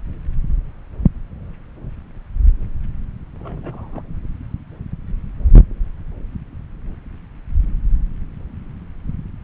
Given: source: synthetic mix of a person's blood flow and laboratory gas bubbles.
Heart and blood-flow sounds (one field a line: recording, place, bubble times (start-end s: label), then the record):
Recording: Doppler ultrasound of blood flow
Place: subclavian vein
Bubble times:
3.40-4.02 s: bubbles
From the record:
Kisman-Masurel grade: 211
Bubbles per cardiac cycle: several, 3 to 8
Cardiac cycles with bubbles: 1 to 10%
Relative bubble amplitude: barely perceptible (0.100 to 0.250)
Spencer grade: 1 (occasional bubble signal discernible with the cardiac motion signal, with majority of cardiac periods free of bubbles)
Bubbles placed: anywhere in the cardiac cycle